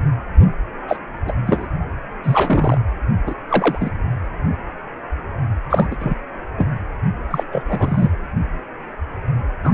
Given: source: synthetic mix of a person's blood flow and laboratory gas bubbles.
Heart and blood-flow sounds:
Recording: Doppler ultrasound of blood flow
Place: precordium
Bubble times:
0.88-0.98 s: bubbles
1.26-1.31 s: bubbles
1.46-1.67 s: bubbles
2.23-2.78 s: bubbles
3.26-3.35 s: bubbles
3.49-3.90 s: bubbles
5.70-5.96 s: bubbles
5.99-6.14 s: bubbles
6.57-6.70 s: bubbles
7.30-7.44 s: bubbles
7.51-7.63 s: bubbles
7.68-8.11 s: bubbles
9.63-9.74 s: bubbles
From the record:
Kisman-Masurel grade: 233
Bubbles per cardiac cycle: several, 3 to 8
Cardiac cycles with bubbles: 50 to 99%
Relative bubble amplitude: loud (0.450 to 0.775)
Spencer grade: 3 (all of the cardiac periods contain showers or single bubble signals, but not dominating or overriding the cardiac motion signals)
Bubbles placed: anywhere in the cardiac cycle

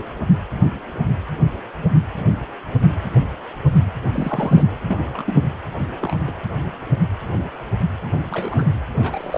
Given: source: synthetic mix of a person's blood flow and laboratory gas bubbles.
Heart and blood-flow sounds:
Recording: Doppler ultrasound of blood flow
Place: precordium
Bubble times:
4.12-4.65 s: bubbles
4.85-5.36 s: bubbles
6.01-6.16 s: bubbles
6.27-6.32 s: bubbles
8.30-8.68 s: bubbles
8.97-9.38 s: bubbles
From the record:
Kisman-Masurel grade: 122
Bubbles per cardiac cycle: 1 to 2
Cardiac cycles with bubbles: 10 to 50%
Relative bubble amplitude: moderate (0.250 to 0.450)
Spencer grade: 2 (many but less than half of the cardiac periods contain bubble signals, singularly or in groups)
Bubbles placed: anywhere in the cardiac cycle

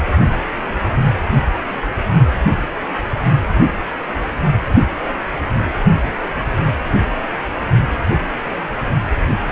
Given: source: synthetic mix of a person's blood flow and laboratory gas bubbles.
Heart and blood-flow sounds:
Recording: Doppler ultrasound of blood flow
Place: precordium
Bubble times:
0.17-0.23 s: bubbles
From the record:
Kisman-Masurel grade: 122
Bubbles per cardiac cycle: 1 to 2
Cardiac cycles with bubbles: 10 to 50%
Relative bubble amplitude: moderate (0.250 to 0.450)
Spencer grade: 2 (many but less than half of the cardiac periods contain bubble signals, singularly or in groups)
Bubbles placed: only in the low amplitude regions of the cardiac cycle

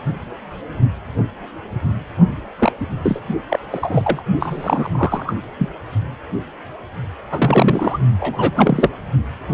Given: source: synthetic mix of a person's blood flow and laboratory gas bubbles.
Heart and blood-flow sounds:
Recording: Doppler ultrasound of blood flow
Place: precordium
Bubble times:
2.58-2.72 s: bubbles
2.81-2.87 s: bubbles
3.03-3.20 s: bubbles
3.49-3.60 s: bubbles
3.71-4.22 s: bubbles
4.39-5.36 s: bubbles
5.58-5.69 s: bubbles
7.30-7.98 s: bubbles
8.20-8.52 s: bubbles
8.56-8.90 s: bubbles
From the record:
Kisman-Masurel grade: 333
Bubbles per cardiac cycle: rolling drumbeat, 9 or more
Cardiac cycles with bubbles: 50 to 99%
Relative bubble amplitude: loud (0.450 to 0.775)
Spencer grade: 3 (all of the cardiac periods contain showers or single bubble signals, but not dominating or overriding the cardiac motion signals)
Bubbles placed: only in the low amplitude regions of the cardiac cycle

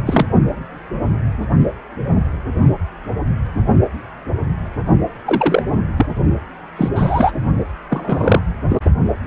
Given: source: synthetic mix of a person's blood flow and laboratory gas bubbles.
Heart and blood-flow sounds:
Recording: Doppler ultrasound of blood flow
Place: precordium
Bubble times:
0.05-0.26 s: bubbles
5.25-5.62 s: bubbles
5.96-6.06 s: bubbles
6.76-6.89 s: bubbles
6.95-7.31 s: bubbles
7.90-8.40 s: bubbles
8.69-8.79 s: bubbles
From the record:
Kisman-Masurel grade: 233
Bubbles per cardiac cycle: several, 3 to 8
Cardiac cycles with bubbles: 50 to 99%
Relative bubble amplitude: loud (0.450 to 0.775)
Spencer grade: 3 (all of the cardiac periods contain showers or single bubble signals, but not dominating or overriding the cardiac motion signals)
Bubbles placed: only in the low amplitude regions of the cardiac cycle

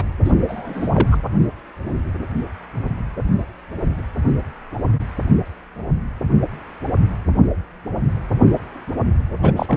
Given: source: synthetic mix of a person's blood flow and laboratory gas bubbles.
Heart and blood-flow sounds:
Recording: Doppler ultrasound of blood flow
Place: precordium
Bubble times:
0.00-0.04 s: bubbles
0.24-0.32 s: bubbles
0.48-1.08 s: bubbles
1.11-1.17 s: bubbles
9.43-9.53 s: bubbles
9.56-9.77 s: bubbles
From the record:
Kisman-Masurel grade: 222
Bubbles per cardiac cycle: several, 3 to 8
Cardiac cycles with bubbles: 10 to 50%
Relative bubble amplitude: moderate (0.250 to 0.450)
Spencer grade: 2 (many but less than half of the cardiac periods contain bubble signals, singularly or in groups)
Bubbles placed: anywhere in the cardiac cycle

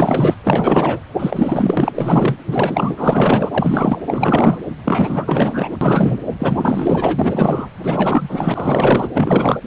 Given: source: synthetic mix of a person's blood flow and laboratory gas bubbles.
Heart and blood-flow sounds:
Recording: Doppler ultrasound of blood flow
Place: precordium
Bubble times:
0.00-0.34 s: bubbles
0.43-1.00 s: bubbles
1.19-2.36 s: bubbles
2.47-3.98 s: bubbles
4.07-4.58 s: bubbles
4.84-5.77 s: bubbles
5.81-6.19 s: bubbles
6.39-7.69 s: bubbles
7.83-9.08 s: bubbles
9.14-9.57 s: bubbles
From the record:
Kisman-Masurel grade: 444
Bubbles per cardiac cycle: continuous sound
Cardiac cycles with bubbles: 100%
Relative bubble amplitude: maximal (0.775 to 0.999)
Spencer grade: 4 (maximum detectable bubble signal sounding continuously throughout systole and diastole of every cardiac period, and overriding the amplitude of the normal cardiac signals)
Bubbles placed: anywhere in the cardiac cycle

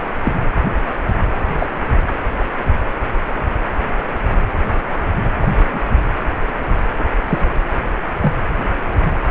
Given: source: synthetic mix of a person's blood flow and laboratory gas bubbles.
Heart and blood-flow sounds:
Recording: Doppler ultrasound of blood flow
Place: precordium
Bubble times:
0.22-0.40 s: bubbles
1.58-1.67 s: bubbles
5.41-5.47 s: bubbles
5.57-5.83 s: bubbles
6.98-7.03 s: bubbles
7.27-7.48 s: bubbles
8.21-8.38 s: bubbles
From the record:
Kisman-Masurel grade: 122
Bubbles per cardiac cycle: 1 to 2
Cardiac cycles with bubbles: 10 to 50%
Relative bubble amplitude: moderate (0.250 to 0.450)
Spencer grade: 2 (many but less than half of the cardiac periods contain bubble signals, singularly or in groups)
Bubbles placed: anywhere in the cardiac cycle

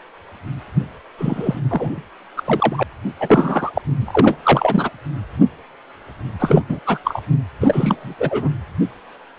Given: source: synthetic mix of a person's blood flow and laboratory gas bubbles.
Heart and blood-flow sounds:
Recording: Doppler ultrasound of blood flow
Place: precordium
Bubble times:
1.18-1.60 s: bubbles
1.69-2.02 s: bubbles
2.36-2.83 s: bubbles
3.19-3.71 s: bubbles
3.75-3.82 s: bubbles
4.00-4.38 s: bubbles
4.43-4.90 s: bubbles
6.39-6.62 s: bubbles
6.68-6.79 s: bubbles
6.86-6.99 s: bubbles
7.04-7.22 s: bubbles
7.60-8.14 s: bubbles
8.19-8.50 s: bubbles
From the record:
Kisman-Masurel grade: 333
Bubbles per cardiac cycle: rolling drumbeat, 9 or more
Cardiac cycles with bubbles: 50 to 99%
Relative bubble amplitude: loud (0.450 to 0.775)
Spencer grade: 3 (all of the cardiac periods contain showers or single bubble signals, but not dominating or overriding the cardiac motion signals)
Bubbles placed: anywhere in the cardiac cycle

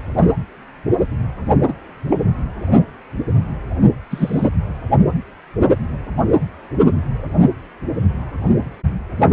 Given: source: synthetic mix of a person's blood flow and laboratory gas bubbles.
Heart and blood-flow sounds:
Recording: Doppler ultrasound of blood flow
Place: precordium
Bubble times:
1.68-1.73 s: bubbles
2.10-2.16 s: bubbles
4.10-4.49 s: bubbles
From the record:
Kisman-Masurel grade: 123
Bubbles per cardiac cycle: 1 to 2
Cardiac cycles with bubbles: 10 to 50%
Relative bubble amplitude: loud (0.450 to 0.775)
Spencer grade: 2 (many but less than half of the cardiac periods contain bubble signals, singularly or in groups)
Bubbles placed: only in the low amplitude regions of the cardiac cycle

